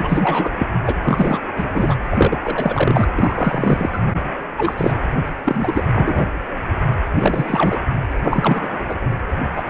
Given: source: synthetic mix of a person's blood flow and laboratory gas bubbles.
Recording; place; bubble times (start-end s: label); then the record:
Doppler ultrasound of blood flow; precordium
0.00-0.51 s: bubbles
0.58-0.66 s: bubbles
0.86-0.96 s: bubbles
1.03-1.39 s: bubbles
1.56-1.95 s: bubbles
2.10-2.38 s: bubbles
2.44-3.11 s: bubbles
3.15-4.12 s: bubbles
4.57-4.93 s: bubbles
5.45-5.88 s: bubbles
5.93-6.26 s: bubbles
7.04-7.79 s: bubbles
8.23-8.84 s: bubbles
8.89-8.95 s: bubbles
9.56-9.63 s: bubbles
9.68-9.70 s: bubbles
From the record:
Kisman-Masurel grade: 333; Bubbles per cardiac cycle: rolling drumbeat, 9 or more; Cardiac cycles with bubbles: 50 to 99%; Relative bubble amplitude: loud (0.450 to 0.775); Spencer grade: 3 (all of the cardiac periods contain showers or single bubble signals, but not dominating or overriding the cardiac motion signals); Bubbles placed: anywhere in the cardiac cycle